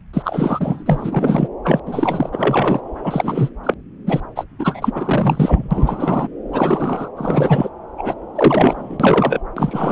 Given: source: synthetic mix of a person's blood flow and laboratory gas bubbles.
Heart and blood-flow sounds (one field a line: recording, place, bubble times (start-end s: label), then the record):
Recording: Doppler ultrasound of blood flow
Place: subclavian vein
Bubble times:
0.13-0.83 s: bubbles
0.86-1.47 s: bubbles
1.64-1.79 s: bubbles
1.86-2.30 s: bubbles
2.32-2.81 s: bubbles
3.03-3.50 s: bubbles
3.63-3.74 s: bubbles
4.06-4.21 s: bubbles
4.35-4.44 s: bubbles
4.59-6.28 s: bubbles
6.52-7.08 s: bubbles
7.17-7.69 s: bubbles
7.98-8.15 s: bubbles
8.35-9.40 s: bubbles
9.57-9.92 s: bubbles
From the record:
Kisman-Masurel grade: 343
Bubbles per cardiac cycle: rolling drumbeat, 9 or more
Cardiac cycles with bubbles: 100%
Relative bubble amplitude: loud (0.450 to 0.775)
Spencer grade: 3 (all of the cardiac periods contain showers or single bubble signals, but not dominating or overriding the cardiac motion signals)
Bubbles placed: anywhere in the cardiac cycle